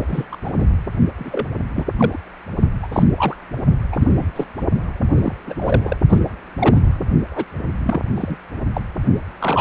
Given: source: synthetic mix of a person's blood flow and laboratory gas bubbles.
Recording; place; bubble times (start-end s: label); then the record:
Doppler ultrasound of blood flow; precordium
0.08-0.25 s: bubbles
0.32-0.36 s: bubbles
0.45-0.50 s: bubbles
0.59-0.66 s: bubbles
1.19-1.46 s: bubbles
1.75-1.84 s: bubbles
1.97-2.19 s: bubbles
2.82-2.88 s: bubbles
2.92-3.09 s: bubbles
3.17-3.36 s: bubbles
3.92-4.08 s: bubbles
4.13-4.30 s: bubbles
4.36-4.46 s: bubbles
5.17-5.33 s: bubbles
5.47-5.54 s: bubbles
5.58-5.97 s: bubbles
6.09-6.19 s: bubbles
6.58-7.10 s: bubbles
7.31-7.45 s: bubbles
7.83-8.01 s: bubbles
8.15-8.37 s: bubbles
8.73-8.81 s: bubbles
9.39-9.61 s: bubbles
From the record:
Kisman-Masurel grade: 242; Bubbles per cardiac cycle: several, 3 to 8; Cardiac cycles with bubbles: 100%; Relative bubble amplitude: moderate (0.250 to 0.450); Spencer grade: 3 (all of the cardiac periods contain showers or single bubble signals, but not dominating or overriding the cardiac motion signals); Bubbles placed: only in the low amplitude regions of the cardiac cycle